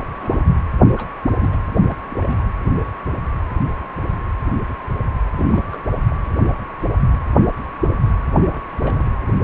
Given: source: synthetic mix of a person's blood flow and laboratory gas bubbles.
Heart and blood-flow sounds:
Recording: Doppler ultrasound of blood flow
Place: precordium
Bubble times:
0.00-0.04 s: bubbles
0.16-0.39 s: bubbles
0.95-1.09 s: bubbles
1.27-1.35 s: bubbles
1.39-1.56 s: bubbles
1.90-1.96 s: bubbles
2.10-2.44 s: bubbles
5.37-5.46 s: bubbles
5.50-5.66 s: bubbles
5.69-5.78 s: bubbles
6.09-6.16 s: bubbles
8.38-8.61 s: bubbles
8.68-8.77 s: bubbles
8.80-9.07 s: bubbles
From the record:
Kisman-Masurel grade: 221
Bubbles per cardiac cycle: several, 3 to 8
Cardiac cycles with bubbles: 10 to 50%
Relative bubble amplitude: barely perceptible (0.100 to 0.250)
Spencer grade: 2 (many but less than half of the cardiac periods contain bubble signals, singularly or in groups)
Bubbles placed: anywhere in the cardiac cycle

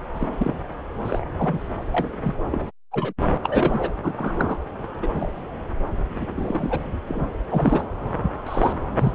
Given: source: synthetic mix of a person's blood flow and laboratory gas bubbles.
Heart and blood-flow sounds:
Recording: Doppler ultrasound of blood flow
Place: subclavian vein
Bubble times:
0.14-0.27 s: bubbles
0.38-0.56 s: bubbles
1.04-1.25 s: bubbles
1.38-1.59 s: bubbles
1.92-2.06 s: bubbles
2.23-2.35 s: bubbles
2.50-2.65 s: bubbles
2.92-3.13 s: bubbles
3.44-3.92 s: bubbles
4.03-4.13 s: bubbles
4.17-4.58 s: bubbles
5.02-5.32 s: bubbles
6.17-6.26 s: bubbles
6.36-6.98 s: bubbles
7.08-7.29 s: bubbles
7.50-7.83 s: bubbles
8.46-8.72 s: bubbles
8.98-9.12 s: bubbles
From the record:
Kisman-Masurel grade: 242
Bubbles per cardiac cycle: several, 3 to 8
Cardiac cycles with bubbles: 100%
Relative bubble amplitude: moderate (0.250 to 0.450)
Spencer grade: 3 (all of the cardiac periods contain showers or single bubble signals, but not dominating or overriding the cardiac motion signals)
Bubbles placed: anywhere in the cardiac cycle

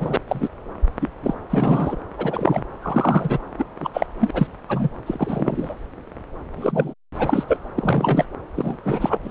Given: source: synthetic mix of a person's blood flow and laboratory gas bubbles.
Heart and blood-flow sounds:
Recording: Doppler ultrasound of blood flow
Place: subclavian vein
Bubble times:
0.00-0.16 s: bubbles
0.27-0.49 s: bubbles
1.01-1.08 s: bubbles
1.22-1.34 s: bubbles
1.49-1.96 s: bubbles
2.18-2.64 s: bubbles
2.81-3.39 s: bubbles
3.58-3.65 s: bubbles
3.80-3.90 s: bubbles
3.94-4.06 s: bubbles
4.19-4.47 s: bubbles
4.68-4.89 s: bubbles
5.06-5.75 s: bubbles
6.56-6.94 s: bubbles
7.18-7.43 s: bubbles
7.47-7.58 s: bubbles
7.75-8.25 s: bubbles
8.56-8.77 s: bubbles
8.84-9.17 s: bubbles
9.23-9.31 s: bubbles
From the record:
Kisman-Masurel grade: 233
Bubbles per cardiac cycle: several, 3 to 8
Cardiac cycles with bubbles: 50 to 99%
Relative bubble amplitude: loud (0.450 to 0.775)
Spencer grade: 3 (all of the cardiac periods contain showers or single bubble signals, but not dominating or overriding the cardiac motion signals)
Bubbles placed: anywhere in the cardiac cycle

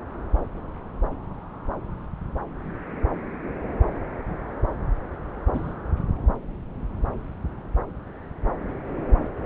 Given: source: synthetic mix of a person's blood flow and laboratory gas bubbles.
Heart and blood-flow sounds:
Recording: Doppler ultrasound of blood flow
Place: subclavian vein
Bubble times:
5.53-5.75 s: bubbles
From the record:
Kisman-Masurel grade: 122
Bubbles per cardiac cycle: 1 to 2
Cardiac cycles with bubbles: 10 to 50%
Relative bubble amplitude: moderate (0.250 to 0.450)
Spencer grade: 2 (many but less than half of the cardiac periods contain bubble signals, singularly or in groups)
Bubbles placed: anywhere in the cardiac cycle

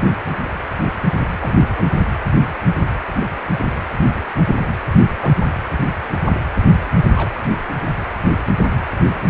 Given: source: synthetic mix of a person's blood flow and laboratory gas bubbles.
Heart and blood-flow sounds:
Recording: Doppler ultrasound of blood flow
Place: precordium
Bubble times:
1.41-1.97 s: bubbles
5.21-5.40 s: bubbles
7.16-7.38 s: bubbles
From the record:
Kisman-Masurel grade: 121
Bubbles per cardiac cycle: 1 to 2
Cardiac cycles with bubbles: 10 to 50%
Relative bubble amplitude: barely perceptible (0.100 to 0.250)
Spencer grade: 2 (many but less than half of the cardiac periods contain bubble signals, singularly or in groups)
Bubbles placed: anywhere in the cardiac cycle

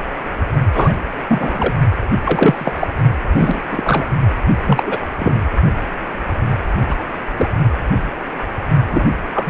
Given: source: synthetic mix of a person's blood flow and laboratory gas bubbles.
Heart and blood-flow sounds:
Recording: Doppler ultrasound of blood flow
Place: precordium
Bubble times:
0.72-0.93 s: bubbles
1.28-1.75 s: bubbles
2.23-2.88 s: bubbles
3.35-3.62 s: bubbles
3.69-4.06 s: bubbles
4.66-5.00 s: bubbles
5.19-5.40 s: bubbles
6.88-6.95 s: bubbles
7.37-7.50 s: bubbles
8.90-9.05 s: bubbles
9.33-9.50 s: bubbles
From the record:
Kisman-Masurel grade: 233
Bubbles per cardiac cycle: several, 3 to 8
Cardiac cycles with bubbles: 50 to 99%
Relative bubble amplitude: loud (0.450 to 0.775)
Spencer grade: 3 (all of the cardiac periods contain showers or single bubble signals, but not dominating or overriding the cardiac motion signals)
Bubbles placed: only in the low amplitude regions of the cardiac cycle

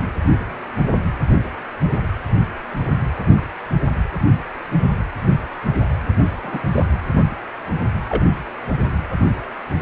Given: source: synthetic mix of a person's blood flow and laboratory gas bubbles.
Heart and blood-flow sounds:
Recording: Doppler ultrasound of blood flow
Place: precordium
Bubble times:
3.37-3.42 s: bubbles
6.42-6.62 s: bubbles
6.75-6.84 s: bubbles
8.08-8.25 s: bubbles
8.73-8.87 s: bubbles
From the record:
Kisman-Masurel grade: 122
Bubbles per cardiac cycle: 1 to 2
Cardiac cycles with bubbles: 10 to 50%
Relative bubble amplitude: moderate (0.250 to 0.450)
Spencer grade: 2 (many but less than half of the cardiac periods contain bubble signals, singularly or in groups)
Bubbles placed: anywhere in the cardiac cycle

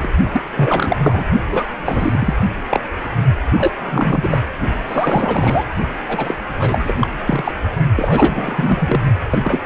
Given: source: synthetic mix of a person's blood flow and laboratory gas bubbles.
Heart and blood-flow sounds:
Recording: Doppler ultrasound of blood flow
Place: precordium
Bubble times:
0.00-0.10 s: bubbles
0.32-0.42 s: bubbles
0.46-1.00 s: bubbles
1.03-1.24 s: bubbles
1.48-1.64 s: bubbles
1.85-2.34 s: bubbles
2.69-2.80 s: bubbles
3.52-3.73 s: bubbles
3.80-4.38 s: bubbles
4.88-5.64 s: bubbles
6.05-6.34 s: bubbles
6.58-6.96 s: bubbles
7.00-7.08 s: bubbles
7.26-7.53 s: bubbles
7.96-9.01 s: bubbles
9.31-9.60 s: bubbles
From the record:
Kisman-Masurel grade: 343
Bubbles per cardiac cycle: rolling drumbeat, 9 or more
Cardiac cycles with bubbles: 100%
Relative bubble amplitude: loud (0.450 to 0.775)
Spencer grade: 3 (all of the cardiac periods contain showers or single bubble signals, but not dominating or overriding the cardiac motion signals)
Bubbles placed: only in the low amplitude regions of the cardiac cycle

